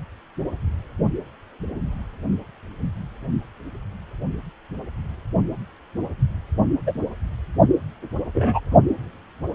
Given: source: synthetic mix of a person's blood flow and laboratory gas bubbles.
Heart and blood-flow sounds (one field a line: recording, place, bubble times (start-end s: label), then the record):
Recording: Doppler ultrasound of blood flow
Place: precordium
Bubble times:
6.86-6.93 s: bubbles
8.34-8.60 s: bubbles
From the record:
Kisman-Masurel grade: 123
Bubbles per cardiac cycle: 1 to 2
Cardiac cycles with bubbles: 10 to 50%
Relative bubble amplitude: loud (0.450 to 0.775)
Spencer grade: 2 (many but less than half of the cardiac periods contain bubble signals, singularly or in groups)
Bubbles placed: only in the low amplitude regions of the cardiac cycle